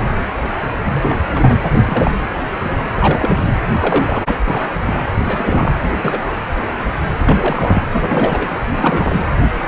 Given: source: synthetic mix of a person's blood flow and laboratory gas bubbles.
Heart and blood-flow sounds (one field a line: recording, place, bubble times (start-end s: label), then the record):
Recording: Doppler ultrasound of blood flow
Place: precordium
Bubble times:
0.85-1.19 s: bubbles
1.33-1.59 s: bubbles
1.74-2.18 s: bubbles
2.97-3.38 s: bubbles
3.81-4.70 s: bubbles
4.85-4.94 s: bubbles
5.23-5.71 s: bubbles
5.82-5.92 s: bubbles
6.04-6.22 s: bubbles
6.26-6.31 s: bubbles
7.23-7.85 s: bubbles
7.92-8.49 s: bubbles
8.75-9.21 s: bubbles
From the record:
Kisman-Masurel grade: 332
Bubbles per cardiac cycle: rolling drumbeat, 9 or more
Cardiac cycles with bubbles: 50 to 99%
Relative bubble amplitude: moderate (0.250 to 0.450)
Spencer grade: 3 (all of the cardiac periods contain showers or single bubble signals, but not dominating or overriding the cardiac motion signals)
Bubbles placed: anywhere in the cardiac cycle